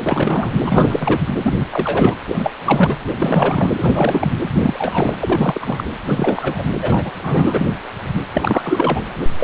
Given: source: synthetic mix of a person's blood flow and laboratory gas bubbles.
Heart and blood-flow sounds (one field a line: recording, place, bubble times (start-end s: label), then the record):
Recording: Doppler ultrasound of blood flow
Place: precordium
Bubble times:
0.04-0.54 s: bubbles
0.63-1.20 s: bubbles
1.42-1.54 s: bubbles
1.58-1.68 s: bubbles
1.71-2.17 s: bubbles
2.28-2.51 s: bubbles
2.65-2.96 s: bubbles
3.17-3.69 s: bubbles
3.76-4.28 s: bubbles
4.62-5.86 s: bubbles
6.05-6.63 s: bubbles
6.81-7.12 s: bubbles
7.18-7.67 s: bubbles
8.33-9.01 s: bubbles
9.38-9.44 s: bubbles
From the record:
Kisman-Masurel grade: 333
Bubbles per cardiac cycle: rolling drumbeat, 9 or more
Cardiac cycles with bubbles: 50 to 99%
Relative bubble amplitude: loud (0.450 to 0.775)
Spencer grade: 3 (all of the cardiac periods contain showers or single bubble signals, but not dominating or overriding the cardiac motion signals)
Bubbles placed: anywhere in the cardiac cycle